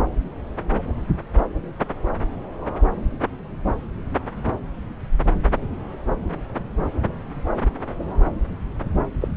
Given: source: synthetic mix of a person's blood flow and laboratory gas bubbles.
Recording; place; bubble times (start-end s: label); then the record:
Doppler ultrasound of blood flow; subclavian vein
9.21-9.28 s: bubbles
From the record:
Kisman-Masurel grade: 123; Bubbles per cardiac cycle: 1 to 2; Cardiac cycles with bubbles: 10 to 50%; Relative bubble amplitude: loud (0.450 to 0.775); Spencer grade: 2 (many but less than half of the cardiac periods contain bubble signals, singularly or in groups); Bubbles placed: anywhere in the cardiac cycle